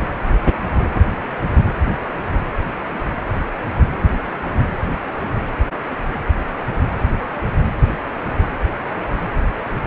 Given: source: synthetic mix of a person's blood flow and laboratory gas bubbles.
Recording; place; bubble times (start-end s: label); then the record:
Doppler ultrasound of blood flow; precordium
no bubbles
From the record:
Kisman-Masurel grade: 000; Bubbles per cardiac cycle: 0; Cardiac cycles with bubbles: 0%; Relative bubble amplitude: no bubbles discernible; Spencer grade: 0 (complete lack of bubble signals)